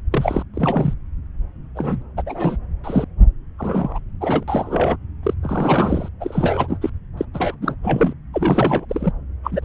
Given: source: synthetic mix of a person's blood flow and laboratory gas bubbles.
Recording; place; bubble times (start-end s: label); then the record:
Doppler ultrasound of blood flow; subclavian vein
0.12-0.42 s: bubbles
0.54-0.94 s: bubbles
1.75-2.03 s: bubbles
2.17-2.22 s: bubbles
2.26-2.58 s: bubbles
2.84-3.05 s: bubbles
3.59-3.99 s: bubbles
4.21-4.45 s: bubbles
4.48-4.97 s: bubbles
5.23-5.33 s: bubbles
5.42-6.08 s: bubbles
6.21-6.90 s: bubbles
7.17-7.25 s: bubbles
7.33-7.56 s: bubbles
7.62-7.75 s: bubbles
7.83-8.13 s: bubbles
8.33-8.85 s: bubbles
8.89-9.12 s: bubbles
9.44-9.65 s: bubbles
From the record:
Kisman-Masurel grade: 342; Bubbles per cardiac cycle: rolling drumbeat, 9 or more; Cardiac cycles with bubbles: 100%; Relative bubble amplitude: moderate (0.250 to 0.450); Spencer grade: 3 (all of the cardiac periods contain showers or single bubble signals, but not dominating or overriding the cardiac motion signals); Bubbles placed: anywhere in the cardiac cycle